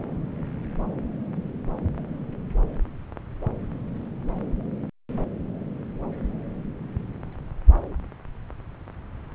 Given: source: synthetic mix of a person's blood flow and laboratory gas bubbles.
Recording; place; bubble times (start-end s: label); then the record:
Doppler ultrasound of blood flow; subclavian vein
no bubbles
From the record:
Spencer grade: 0 (complete lack of bubble signals)